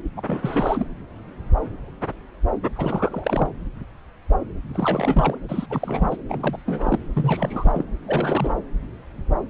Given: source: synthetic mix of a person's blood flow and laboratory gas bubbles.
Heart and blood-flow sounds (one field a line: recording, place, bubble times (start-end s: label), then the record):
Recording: Doppler ultrasound of blood flow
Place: subclavian vein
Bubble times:
0.16-0.22 s: bubbles
0.28-0.87 s: bubbles
2.76-3.50 s: bubbles
4.70-5.38 s: bubbles
5.49-5.66 s: bubbles
5.70-6.17 s: bubbles
6.29-6.57 s: bubbles
6.66-6.99 s: bubbles
7.13-7.84 s: bubbles
8.06-8.54 s: bubbles
From the record:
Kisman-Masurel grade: 332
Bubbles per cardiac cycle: rolling drumbeat, 9 or more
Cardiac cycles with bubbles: 50 to 99%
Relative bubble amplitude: moderate (0.250 to 0.450)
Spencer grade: 3 (all of the cardiac periods contain showers or single bubble signals, but not dominating or overriding the cardiac motion signals)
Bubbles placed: anywhere in the cardiac cycle